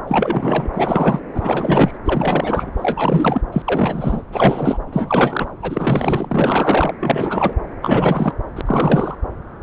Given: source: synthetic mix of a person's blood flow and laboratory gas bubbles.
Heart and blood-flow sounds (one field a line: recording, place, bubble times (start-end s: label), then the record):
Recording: Doppler ultrasound of blood flow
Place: subclavian vein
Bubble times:
0.07-0.69 s: bubbles
0.73-1.20 s: bubbles
1.34-1.98 s: bubbles
2.05-2.71 s: bubbles
2.77-3.42 s: bubbles
3.52-3.62 s: bubbles
3.65-4.22 s: bubbles
4.32-4.78 s: bubbles
4.92-5.48 s: bubbles
5.61-6.94 s: bubbles
6.99-7.53 s: bubbles
7.82-8.34 s: bubbles
8.55-8.61 s: bubbles
8.65-9.15 s: bubbles
From the record:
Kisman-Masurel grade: 343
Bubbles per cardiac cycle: rolling drumbeat, 9 or more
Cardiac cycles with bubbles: 100%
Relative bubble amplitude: loud (0.450 to 0.775)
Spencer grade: 3 (all of the cardiac periods contain showers or single bubble signals, but not dominating or overriding the cardiac motion signals)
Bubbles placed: anywhere in the cardiac cycle